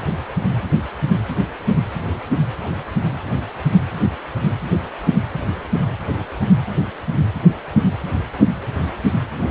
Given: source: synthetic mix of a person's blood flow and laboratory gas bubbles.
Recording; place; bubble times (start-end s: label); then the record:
Doppler ultrasound of blood flow; precordium
9.38-9.51 s: bubbles
From the record:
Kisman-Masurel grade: 212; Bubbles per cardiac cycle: several, 3 to 8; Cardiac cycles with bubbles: 1 to 10%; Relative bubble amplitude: moderate (0.250 to 0.450); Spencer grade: 1 (occasional bubble signal discernible with the cardiac motion signal, with majority of cardiac periods free of bubbles); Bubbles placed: anywhere in the cardiac cycle